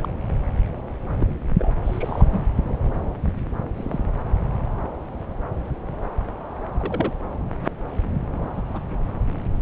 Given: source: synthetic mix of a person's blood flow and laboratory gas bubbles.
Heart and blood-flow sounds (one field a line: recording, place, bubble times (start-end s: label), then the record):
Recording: Doppler ultrasound of blood flow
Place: subclavian vein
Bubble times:
0.01-0.08 s: bubbles
1.20-1.35 s: bubbles
1.57-1.72 s: bubbles
1.82-2.44 s: bubbles
3.77-4.00 s: bubbles
6.76-7.13 s: bubbles
8.55-8.62 s: bubbles
8.73-8.81 s: bubbles
From the record:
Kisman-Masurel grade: 122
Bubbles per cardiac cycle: 1 to 2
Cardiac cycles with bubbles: 10 to 50%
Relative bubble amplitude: moderate (0.250 to 0.450)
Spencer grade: 2 (many but less than half of the cardiac periods contain bubble signals, singularly or in groups)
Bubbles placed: anywhere in the cardiac cycle